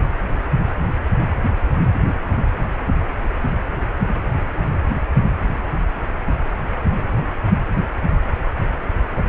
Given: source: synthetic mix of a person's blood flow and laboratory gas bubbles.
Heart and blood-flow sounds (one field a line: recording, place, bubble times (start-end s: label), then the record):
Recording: Doppler ultrasound of blood flow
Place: precordium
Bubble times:
9.16-9.22 s: bubbles
From the record:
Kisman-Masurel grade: 122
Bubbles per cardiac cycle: 1 to 2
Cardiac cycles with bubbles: 10 to 50%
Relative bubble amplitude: moderate (0.250 to 0.450)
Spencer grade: 2 (many but less than half of the cardiac periods contain bubble signals, singularly or in groups)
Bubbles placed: anywhere in the cardiac cycle